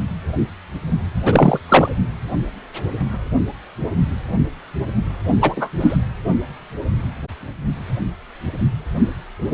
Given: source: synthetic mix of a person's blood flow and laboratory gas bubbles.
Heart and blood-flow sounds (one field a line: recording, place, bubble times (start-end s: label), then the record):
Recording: Doppler ultrasound of blood flow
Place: precordium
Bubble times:
1.25-1.59 s: bubbles
1.68-1.89 s: bubbles
5.41-5.68 s: bubbles
5.80-5.96 s: bubbles
From the record:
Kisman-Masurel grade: 223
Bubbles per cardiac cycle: several, 3 to 8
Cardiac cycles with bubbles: 10 to 50%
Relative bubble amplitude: loud (0.450 to 0.775)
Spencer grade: 2 (many but less than half of the cardiac periods contain bubble signals, singularly or in groups)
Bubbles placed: only in the low amplitude regions of the cardiac cycle